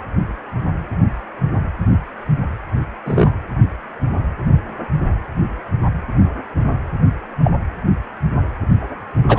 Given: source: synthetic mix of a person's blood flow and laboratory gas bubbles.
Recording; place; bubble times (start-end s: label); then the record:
Doppler ultrasound of blood flow; precordium
3.05-3.31 s: bubbles
7.43-7.51 s: bubbles
9.28-9.39 s: bubbles
From the record:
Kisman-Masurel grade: 123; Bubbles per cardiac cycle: 1 to 2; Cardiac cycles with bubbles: 10 to 50%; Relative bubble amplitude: loud (0.450 to 0.775); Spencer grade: 2 (many but less than half of the cardiac periods contain bubble signals, singularly or in groups); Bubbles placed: anywhere in the cardiac cycle